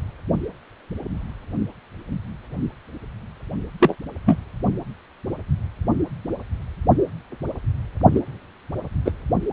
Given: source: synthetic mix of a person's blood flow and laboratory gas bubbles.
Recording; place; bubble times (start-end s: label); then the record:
Doppler ultrasound of blood flow; precordium
3.79-3.95 s: bubbles
4.26-4.38 s: bubbles
8.14-8.20 s: bubbles
9.05-9.12 s: bubbles
From the record:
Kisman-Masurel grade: 122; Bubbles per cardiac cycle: 1 to 2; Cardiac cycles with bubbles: 10 to 50%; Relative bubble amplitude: moderate (0.250 to 0.450); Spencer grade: 2 (many but less than half of the cardiac periods contain bubble signals, singularly or in groups); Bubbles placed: only in the low amplitude regions of the cardiac cycle